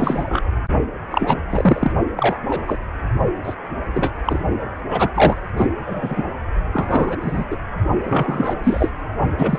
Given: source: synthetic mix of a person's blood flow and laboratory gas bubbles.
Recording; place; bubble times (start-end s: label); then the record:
Doppler ultrasound of blood flow; precordium
0.00-0.24 s: bubbles
0.28-0.42 s: bubbles
1.11-1.38 s: bubbles
1.50-1.91 s: bubbles
2.17-2.38 s: bubbles
2.48-2.77 s: bubbles
3.43-3.55 s: bubbles
3.94-4.10 s: bubbles
4.25-4.39 s: bubbles
4.89-5.11 s: bubbles
5.14-5.35 s: bubbles
5.56-5.66 s: bubbles
5.85-6.23 s: bubbles
6.73-7.17 s: bubbles
7.21-7.44 s: bubbles
7.50-7.56 s: bubbles
8.04-8.54 s: bubbles
8.63-8.89 s: bubbles
9.38-9.59 s: bubbles
From the record:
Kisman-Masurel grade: 242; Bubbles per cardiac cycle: several, 3 to 8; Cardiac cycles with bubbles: 100%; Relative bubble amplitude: moderate (0.250 to 0.450); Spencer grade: 3 (all of the cardiac periods contain showers or single bubble signals, but not dominating or overriding the cardiac motion signals); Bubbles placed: only in the low amplitude regions of the cardiac cycle